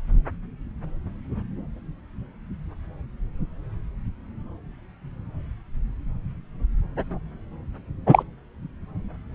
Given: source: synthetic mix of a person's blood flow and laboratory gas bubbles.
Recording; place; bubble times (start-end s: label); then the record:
Doppler ultrasound of blood flow; subclavian vein
8.06-8.23 s: bubbles
From the record:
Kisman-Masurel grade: 123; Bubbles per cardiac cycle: 1 to 2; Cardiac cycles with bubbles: 10 to 50%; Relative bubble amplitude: loud (0.450 to 0.775); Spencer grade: 2 (many but less than half of the cardiac periods contain bubble signals, singularly or in groups); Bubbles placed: anywhere in the cardiac cycle